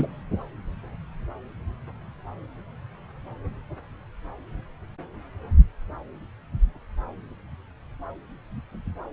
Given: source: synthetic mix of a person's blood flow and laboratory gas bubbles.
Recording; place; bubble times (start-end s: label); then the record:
Doppler ultrasound of blood flow; subclavian vein
0.00-0.07 s: bubbles
From the record:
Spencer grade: 2 (many but less than half of the cardiac periods contain bubble signals, singularly or in groups); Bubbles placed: anywhere in the cardiac cycle